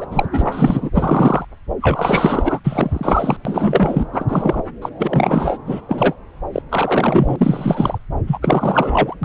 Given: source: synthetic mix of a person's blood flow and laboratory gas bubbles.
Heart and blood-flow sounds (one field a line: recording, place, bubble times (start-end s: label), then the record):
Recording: Doppler ultrasound of blood flow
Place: subclavian vein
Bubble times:
0.00-0.07 s: bubbles
0.12-0.27 s: bubbles
0.32-0.90 s: bubbles
0.93-1.45 s: bubbles
1.81-2.59 s: bubbles
2.64-3.36 s: bubbles
3.45-4.06 s: bubbles
4.12-4.26 s: bubbles
4.28-4.62 s: bubbles
4.82-4.90 s: bubbles
4.99-5.58 s: bubbles
5.66-5.81 s: bubbles
5.89-6.14 s: bubbles
6.53-6.62 s: bubbles
6.69-7.36 s: bubbles
7.39-7.99 s: bubbles
8.27-8.38 s: bubbles
8.42-9.15 s: bubbles
9.23-9.25 s: bubbles
From the record:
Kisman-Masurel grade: 343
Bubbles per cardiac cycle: rolling drumbeat, 9 or more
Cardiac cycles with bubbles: 100%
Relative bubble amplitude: loud (0.450 to 0.775)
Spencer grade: 3 (all of the cardiac periods contain showers or single bubble signals, but not dominating or overriding the cardiac motion signals)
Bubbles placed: anywhere in the cardiac cycle